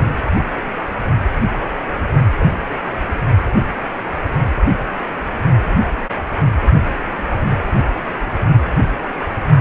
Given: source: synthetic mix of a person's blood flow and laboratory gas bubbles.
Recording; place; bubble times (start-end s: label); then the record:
Doppler ultrasound of blood flow; precordium
2.39-2.48 s: bubbles
5.10-5.18 s: bubbles
7.43-7.53 s: bubbles
From the record:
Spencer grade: 2 (many but less than half of the cardiac periods contain bubble signals, singularly or in groups); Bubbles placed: only in the low amplitude regions of the cardiac cycle